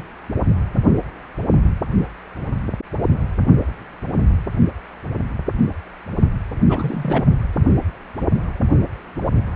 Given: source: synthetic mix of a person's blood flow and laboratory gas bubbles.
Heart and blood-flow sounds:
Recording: Doppler ultrasound of blood flow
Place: precordium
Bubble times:
6.68-7.25 s: bubbles
From the record:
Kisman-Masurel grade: 212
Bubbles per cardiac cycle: several, 3 to 8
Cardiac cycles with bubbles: 1 to 10%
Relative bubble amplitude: moderate (0.250 to 0.450)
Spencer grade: 1 (occasional bubble signal discernible with the cardiac motion signal, with majority of cardiac periods free of bubbles)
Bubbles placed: only in the low amplitude regions of the cardiac cycle

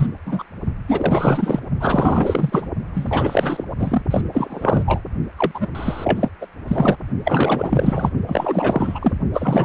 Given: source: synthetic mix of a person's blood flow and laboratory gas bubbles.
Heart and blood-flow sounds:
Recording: Doppler ultrasound of blood flow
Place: precordium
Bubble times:
0.00-0.07 s: bubbles
0.26-0.44 s: bubbles
0.87-1.59 s: bubbles
1.80-2.67 s: bubbles
2.94-3.64 s: bubbles
3.79-4.02 s: bubbles
4.11-4.21 s: bubbles
4.32-4.83 s: bubbles
4.86-5.01 s: bubbles
5.37-5.51 s: bubbles
5.54-5.69 s: bubbles
5.75-6.29 s: bubbles
6.41-6.46 s: bubbles
6.67-6.96 s: bubbles
7.25-8.11 s: bubbles
8.27-9.12 s: bubbles
9.33-9.65 s: bubbles
From the record:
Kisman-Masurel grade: 444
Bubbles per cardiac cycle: continuous sound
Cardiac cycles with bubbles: 100%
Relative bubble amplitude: maximal (0.775 to 0.999)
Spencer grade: 4 (maximum detectable bubble signal sounding continuously throughout systole and diastole of every cardiac period, and overriding the amplitude of the normal cardiac signals)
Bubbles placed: only in the low amplitude regions of the cardiac cycle

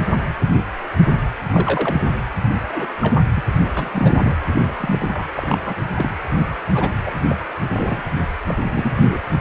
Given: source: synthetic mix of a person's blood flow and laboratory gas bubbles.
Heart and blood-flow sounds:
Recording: Doppler ultrasound of blood flow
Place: precordium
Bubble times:
1.44-2.02 s: bubbles
2.73-2.86 s: bubbles
3.02-3.17 s: bubbles
3.35-3.42 s: bubbles
3.75-4.34 s: bubbles
4.67-4.72 s: bubbles
4.80-5.27 s: bubbles
5.34-5.79 s: bubbles
5.96-6.13 s: bubbles
6.74-6.90 s: bubbles
7.06-7.14 s: bubbles
7.29-7.36 s: bubbles
7.72-8.02 s: bubbles
8.46-8.54 s: bubbles
8.73-9.19 s: bubbles
From the record:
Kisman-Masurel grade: 232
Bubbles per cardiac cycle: several, 3 to 8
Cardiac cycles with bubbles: 50 to 99%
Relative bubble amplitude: moderate (0.250 to 0.450)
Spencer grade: 3 (all of the cardiac periods contain showers or single bubble signals, but not dominating or overriding the cardiac motion signals)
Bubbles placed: anywhere in the cardiac cycle

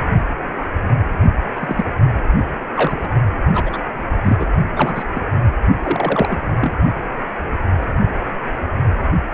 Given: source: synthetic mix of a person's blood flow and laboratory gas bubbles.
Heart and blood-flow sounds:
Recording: Doppler ultrasound of blood flow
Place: precordium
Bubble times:
0.00-0.02 s: bubbles
1.55-1.84 s: bubbles
2.76-2.97 s: bubbles
3.01-3.09 s: bubbles
3.54-3.78 s: bubbles
4.23-4.37 s: bubbles
4.39-4.49 s: bubbles
4.75-5.04 s: bubbles
5.15-5.20 s: bubbles
5.83-6.40 s: bubbles
6.61-6.74 s: bubbles
From the record:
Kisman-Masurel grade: 232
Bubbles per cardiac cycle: several, 3 to 8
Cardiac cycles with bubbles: 50 to 99%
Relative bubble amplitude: moderate (0.250 to 0.450)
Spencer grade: 3 (all of the cardiac periods contain showers or single bubble signals, but not dominating or overriding the cardiac motion signals)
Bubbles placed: only in the low amplitude regions of the cardiac cycle

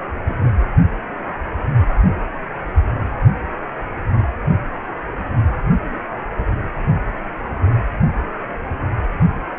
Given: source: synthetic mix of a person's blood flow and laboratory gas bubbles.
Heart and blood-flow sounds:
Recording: Doppler ultrasound of blood flow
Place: precordium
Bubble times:
0.25-0.50 s: bubbles
From the record:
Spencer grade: 2 (many but less than half of the cardiac periods contain bubble signals, singularly or in groups)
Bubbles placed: only in the low amplitude regions of the cardiac cycle

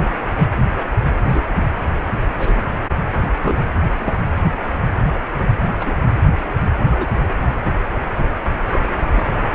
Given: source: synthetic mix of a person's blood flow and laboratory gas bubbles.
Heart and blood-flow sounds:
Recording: Doppler ultrasound of blood flow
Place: precordium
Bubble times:
1.25-1.41 s: bubbles
2.38-2.66 s: bubbles
3.43-3.59 s: bubbles
3.97-4.13 s: bubbles
5.79-5.98 s: bubbles
6.90-7.18 s: bubbles
8.71-8.79 s: bubbles
9.14-9.25 s: bubbles
From the record:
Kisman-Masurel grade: 121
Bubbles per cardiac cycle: 1 to 2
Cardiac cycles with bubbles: 10 to 50%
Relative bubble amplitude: barely perceptible (0.100 to 0.250)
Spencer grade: 2 (many but less than half of the cardiac periods contain bubble signals, singularly or in groups)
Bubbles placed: anywhere in the cardiac cycle

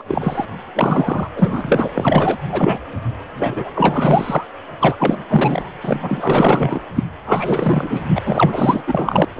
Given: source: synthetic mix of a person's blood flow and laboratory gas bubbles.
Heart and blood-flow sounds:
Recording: Doppler ultrasound of blood flow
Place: precordium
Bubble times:
0.00-0.02 s: bubbles
0.07-0.45 s: bubbles
0.74-1.29 s: bubbles
1.36-1.88 s: bubbles
1.95-2.38 s: bubbles
2.49-2.79 s: bubbles
3.39-3.71 s: bubbles
3.75-4.44 s: bubbles
4.80-4.96 s: bubbles
5.00-5.17 s: bubbles
5.29-5.70 s: bubbles
5.83-6.80 s: bubbles
6.96-7.03 s: bubbles
7.26-8.05 s: bubbles
8.15-8.21 s: bubbles
8.25-8.83 s: bubbles
8.87-9.25 s: bubbles
9.35-9.40 s: bubbles
From the record:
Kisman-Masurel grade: 444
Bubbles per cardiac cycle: continuous sound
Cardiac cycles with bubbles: 100%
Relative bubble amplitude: maximal (0.775 to 0.999)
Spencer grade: 4 (maximum detectable bubble signal sounding continuously throughout systole and diastole of every cardiac period, and overriding the amplitude of the normal cardiac signals)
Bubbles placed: anywhere in the cardiac cycle

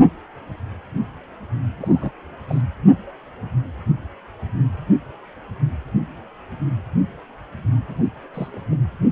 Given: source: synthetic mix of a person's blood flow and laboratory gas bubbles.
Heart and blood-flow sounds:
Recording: Doppler ultrasound of blood flow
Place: precordium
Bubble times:
1.79-2.12 s: bubbles
2.48-2.62 s: bubbles
7.89-8.10 s: bubbles
8.34-8.62 s: bubbles
8.71-8.76 s: bubbles
From the record:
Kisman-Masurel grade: 221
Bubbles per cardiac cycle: several, 3 to 8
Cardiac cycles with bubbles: 10 to 50%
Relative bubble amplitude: barely perceptible (0.100 to 0.250)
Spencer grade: 2 (many but less than half of the cardiac periods contain bubble signals, singularly or in groups)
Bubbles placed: anywhere in the cardiac cycle

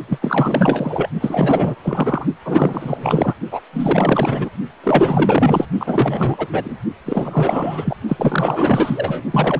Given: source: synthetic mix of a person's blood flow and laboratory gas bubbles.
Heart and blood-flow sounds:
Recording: Doppler ultrasound of blood flow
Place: precordium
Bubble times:
0.07-0.18 s: bubbles
0.21-1.09 s: bubbles
1.20-1.75 s: bubbles
1.83-2.26 s: bubbles
2.45-3.35 s: bubbles
3.51-3.60 s: bubbles
3.73-4.50 s: bubbles
4.83-5.69 s: bubbles
5.79-6.47 s: bubbles
6.52-6.77 s: bubbles
7.05-7.96 s: bubbles
8.07-9.22 s: bubbles
9.30-9.60 s: bubbles
From the record:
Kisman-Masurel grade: 444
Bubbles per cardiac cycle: continuous sound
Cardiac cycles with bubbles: 100%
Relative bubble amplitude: maximal (0.775 to 0.999)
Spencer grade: 4 (maximum detectable bubble signal sounding continuously throughout systole and diastole of every cardiac period, and overriding the amplitude of the normal cardiac signals)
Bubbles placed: only in the low amplitude regions of the cardiac cycle

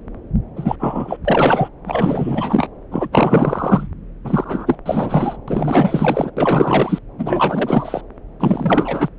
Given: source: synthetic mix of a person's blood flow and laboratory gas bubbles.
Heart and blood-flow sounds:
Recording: Doppler ultrasound of blood flow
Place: subclavian vein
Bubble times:
0.56-0.76 s: bubbles
0.79-1.17 s: bubbles
1.24-1.69 s: bubbles
1.85-2.68 s: bubbles
2.91-3.08 s: bubbles
3.12-3.88 s: bubbles
4.24-4.77 s: bubbles
4.85-5.37 s: bubbles
5.47-6.31 s: bubbles
6.37-6.99 s: bubbles
7.18-8.01 s: bubbles
8.40-9.09 s: bubbles
From the record:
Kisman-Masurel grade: 444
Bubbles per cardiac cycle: continuous sound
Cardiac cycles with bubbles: 100%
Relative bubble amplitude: maximal (0.775 to 0.999)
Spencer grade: 4 (maximum detectable bubble signal sounding continuously throughout systole and diastole of every cardiac period, and overriding the amplitude of the normal cardiac signals)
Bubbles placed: anywhere in the cardiac cycle

